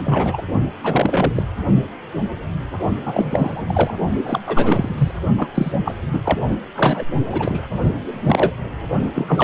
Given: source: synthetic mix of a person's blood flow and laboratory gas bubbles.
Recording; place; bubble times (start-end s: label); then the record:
Doppler ultrasound of blood flow; precordium
0.04-0.42 s: bubbles
0.83-1.33 s: bubbles
1.35-1.43 s: bubbles
3.05-3.95 s: bubbles
4.24-4.40 s: bubbles
4.46-5.11 s: bubbles
5.38-5.48 s: bubbles
5.54-5.78 s: bubbles
5.85-5.95 s: bubbles
6.12-6.20 s: bubbles
6.24-6.41 s: bubbles
6.48-6.58 s: bubbles
6.75-7.06 s: bubbles
7.32-7.62 s: bubbles
7.81-7.91 s: bubbles
8.05-8.51 s: bubbles
9.14-9.44 s: bubbles
From the record:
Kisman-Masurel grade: 332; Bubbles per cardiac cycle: rolling drumbeat, 9 or more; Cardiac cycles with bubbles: 50 to 99%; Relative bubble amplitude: moderate (0.250 to 0.450); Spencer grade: 3 (all of the cardiac periods contain showers or single bubble signals, but not dominating or overriding the cardiac motion signals); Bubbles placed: only in the low amplitude regions of the cardiac cycle